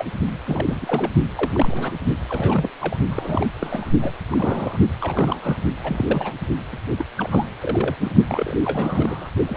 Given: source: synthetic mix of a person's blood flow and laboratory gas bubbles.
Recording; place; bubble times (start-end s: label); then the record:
Doppler ultrasound of blood flow; precordium
0.00-0.05 s: bubbles
0.45-1.10 s: bubbles
1.35-1.92 s: bubbles
2.29-2.70 s: bubbles
2.79-2.97 s: bubbles
3.11-3.46 s: bubbles
3.61-3.90 s: bubbles
4.02-4.11 s: bubbles
4.31-4.79 s: bubbles
5.00-5.58 s: bubbles
5.84-6.33 s: bubbles
6.72-6.80 s: bubbles
6.97-7.05 s: bubbles
7.18-7.45 s: bubbles
7.61-7.96 s: bubbles
8.01-8.12 s: bubbles
8.28-8.55 s: bubbles
8.64-9.29 s: bubbles
9.46-9.57 s: bubbles
From the record:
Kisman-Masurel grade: 342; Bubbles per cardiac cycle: rolling drumbeat, 9 or more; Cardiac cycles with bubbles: 100%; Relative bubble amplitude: moderate (0.250 to 0.450); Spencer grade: 3 (all of the cardiac periods contain showers or single bubble signals, but not dominating or overriding the cardiac motion signals); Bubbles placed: only in the low amplitude regions of the cardiac cycle